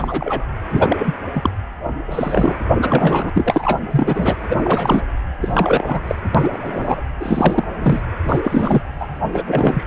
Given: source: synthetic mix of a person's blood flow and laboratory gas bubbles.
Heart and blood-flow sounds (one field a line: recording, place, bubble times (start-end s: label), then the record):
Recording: Doppler ultrasound of blood flow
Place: precordium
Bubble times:
0.00-0.46 s: bubbles
0.71-1.14 s: bubbles
1.34-1.50 s: bubbles
2.07-2.54 s: bubbles
2.81-3.30 s: bubbles
3.35-3.80 s: bubbles
3.91-4.37 s: bubbles
4.49-5.02 s: bubbles
5.41-6.02 s: bubbles
6.07-6.15 s: bubbles
6.34-6.50 s: bubbles
6.53-7.03 s: bubbles
7.20-7.66 s: bubbles
7.79-8.01 s: bubbles
8.24-8.40 s: bubbles
8.44-8.82 s: bubbles
8.99-9.05 s: bubbles
9.35-9.42 s: bubbles
9.46-9.86 s: bubbles
From the record:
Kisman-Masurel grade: 333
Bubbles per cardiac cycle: rolling drumbeat, 9 or more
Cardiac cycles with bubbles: 50 to 99%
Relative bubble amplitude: loud (0.450 to 0.775)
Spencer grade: 3 (all of the cardiac periods contain showers or single bubble signals, but not dominating or overriding the cardiac motion signals)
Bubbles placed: anywhere in the cardiac cycle